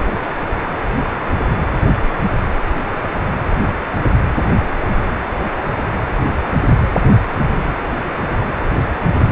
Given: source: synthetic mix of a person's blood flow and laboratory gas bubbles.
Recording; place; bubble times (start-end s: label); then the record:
Doppler ultrasound of blood flow; precordium
9.14-9.21 s: bubbles
From the record:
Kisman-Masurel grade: 111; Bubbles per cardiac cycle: 1 to 2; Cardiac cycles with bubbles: 1 to 10%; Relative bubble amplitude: barely perceptible (0.100 to 0.250); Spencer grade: 1 (occasional bubble signal discernible with the cardiac motion signal, with majority of cardiac periods free of bubbles); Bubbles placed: anywhere in the cardiac cycle